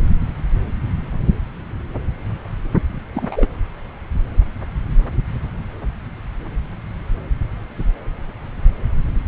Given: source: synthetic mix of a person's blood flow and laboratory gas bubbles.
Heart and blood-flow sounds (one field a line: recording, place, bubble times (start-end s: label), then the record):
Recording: Doppler ultrasound of blood flow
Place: subclavian vein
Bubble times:
3.15-3.47 s: bubbles
From the record:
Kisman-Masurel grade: 112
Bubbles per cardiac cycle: 1 to 2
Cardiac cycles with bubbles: 1 to 10%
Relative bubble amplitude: moderate (0.250 to 0.450)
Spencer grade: 1 (occasional bubble signal discernible with the cardiac motion signal, with majority of cardiac periods free of bubbles)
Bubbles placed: anywhere in the cardiac cycle